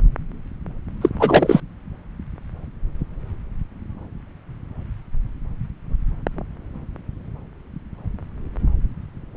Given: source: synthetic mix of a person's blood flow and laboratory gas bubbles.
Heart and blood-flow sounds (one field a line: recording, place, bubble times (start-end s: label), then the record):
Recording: Doppler ultrasound of blood flow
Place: subclavian vein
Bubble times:
1.01-1.09 s: bubbles
1.19-1.60 s: bubbles
From the record:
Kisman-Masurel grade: 213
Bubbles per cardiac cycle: several, 3 to 8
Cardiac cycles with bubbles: 1 to 10%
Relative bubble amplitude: loud (0.450 to 0.775)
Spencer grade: 1 (occasional bubble signal discernible with the cardiac motion signal, with majority of cardiac periods free of bubbles)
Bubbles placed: anywhere in the cardiac cycle